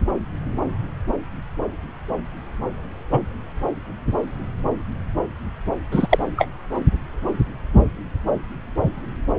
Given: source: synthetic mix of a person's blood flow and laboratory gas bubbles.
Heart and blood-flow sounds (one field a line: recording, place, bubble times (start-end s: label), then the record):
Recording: Doppler ultrasound of blood flow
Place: subclavian vein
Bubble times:
3.11-3.20 s: bubbles
5.92-6.18 s: bubbles
6.37-6.48 s: bubbles
From the record:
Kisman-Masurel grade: 123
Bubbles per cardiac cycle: 1 to 2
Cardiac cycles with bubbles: 10 to 50%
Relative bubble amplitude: loud (0.450 to 0.775)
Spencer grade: 2 (many but less than half of the cardiac periods contain bubble signals, singularly or in groups)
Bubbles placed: anywhere in the cardiac cycle